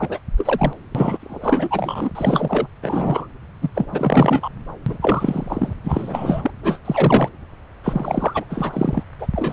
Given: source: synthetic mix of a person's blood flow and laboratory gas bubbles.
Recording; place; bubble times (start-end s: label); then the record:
Doppler ultrasound of blood flow; subclavian vein
0.00-0.18 s: bubbles
0.37-0.73 s: bubbles
0.94-2.10 s: bubbles
2.15-2.67 s: bubbles
2.82-3.27 s: bubbles
3.61-3.69 s: bubbles
3.75-3.86 s: bubbles
3.92-4.49 s: bubbles
4.86-4.98 s: bubbles
5.01-5.74 s: bubbles
5.84-6.51 s: bubbles
6.63-6.79 s: bubbles
6.84-7.29 s: bubbles
7.83-8.45 s: bubbles
8.49-9.04 s: bubbles
9.20-9.27 s: bubbles
9.33-9.53 s: bubbles
From the record:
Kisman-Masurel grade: 342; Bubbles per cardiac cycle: rolling drumbeat, 9 or more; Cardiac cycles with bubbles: 100%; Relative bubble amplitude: moderate (0.250 to 0.450); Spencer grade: 3 (all of the cardiac periods contain showers or single bubble signals, but not dominating or overriding the cardiac motion signals); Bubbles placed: anywhere in the cardiac cycle